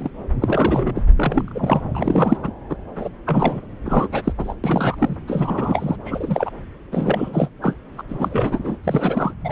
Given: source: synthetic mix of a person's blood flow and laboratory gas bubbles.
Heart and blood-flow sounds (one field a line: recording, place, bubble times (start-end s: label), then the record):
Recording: Doppler ultrasound of blood flow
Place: subclavian vein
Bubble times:
0.00-0.10 s: bubbles
0.41-0.91 s: bubbles
0.95-1.02 s: bubbles
1.16-1.52 s: bubbles
1.54-1.81 s: bubbles
1.94-2.37 s: bubbles
2.43-2.52 s: bubbles
2.69-2.75 s: bubbles
2.96-3.08 s: bubbles
3.27-3.60 s: bubbles
3.85-4.08 s: bubbles
4.12-4.32 s: bubbles
4.38-4.54 s: bubbles
4.63-4.96 s: bubbles
4.98-5.17 s: bubbles
5.27-5.96 s: bubbles
6.04-6.50 s: bubbles
6.92-7.49 s: bubbles
7.62-7.73 s: bubbles
7.97-8.03 s: bubbles
8.09-8.76 s: bubbles
8.83-9.33 s: bubbles
9.45-9.52 s: bubbles
From the record:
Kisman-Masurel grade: 342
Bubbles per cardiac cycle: rolling drumbeat, 9 or more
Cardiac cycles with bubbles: 100%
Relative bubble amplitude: moderate (0.250 to 0.450)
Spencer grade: 3 (all of the cardiac periods contain showers or single bubble signals, but not dominating or overriding the cardiac motion signals)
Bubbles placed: anywhere in the cardiac cycle